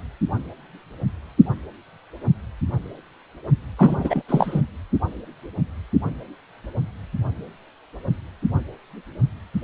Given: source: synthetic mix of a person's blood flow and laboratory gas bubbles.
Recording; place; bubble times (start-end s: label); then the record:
Doppler ultrasound of blood flow; precordium
3.78-4.23 s: bubbles
4.28-4.61 s: bubbles
From the record:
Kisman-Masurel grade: 223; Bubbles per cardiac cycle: several, 3 to 8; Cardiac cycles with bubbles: 10 to 50%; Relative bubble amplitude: loud (0.450 to 0.775); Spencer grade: 2 (many but less than half of the cardiac periods contain bubble signals, singularly or in groups); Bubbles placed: anywhere in the cardiac cycle